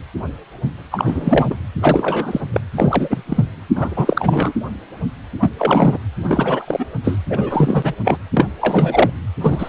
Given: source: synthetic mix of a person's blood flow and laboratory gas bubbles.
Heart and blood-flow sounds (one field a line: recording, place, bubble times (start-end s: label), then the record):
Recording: Doppler ultrasound of blood flow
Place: precordium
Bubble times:
0.91-1.56 s: bubbles
1.81-2.41 s: bubbles
2.52-2.60 s: bubbles
2.75-3.23 s: bubbles
3.26-3.44 s: bubbles
3.75-4.53 s: bubbles
5.40-5.51 s: bubbles
5.58-5.97 s: bubbles
6.22-6.86 s: bubbles
7.03-7.19 s: bubbles
7.29-7.93 s: bubbles
8.04-8.18 s: bubbles
8.33-8.48 s: bubbles
8.61-9.10 s: bubbles
9.41-9.69 s: bubbles
From the record:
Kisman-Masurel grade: 333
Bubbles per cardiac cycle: rolling drumbeat, 9 or more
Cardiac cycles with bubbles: 50 to 99%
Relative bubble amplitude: loud (0.450 to 0.775)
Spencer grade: 3 (all of the cardiac periods contain showers or single bubble signals, but not dominating or overriding the cardiac motion signals)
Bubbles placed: anywhere in the cardiac cycle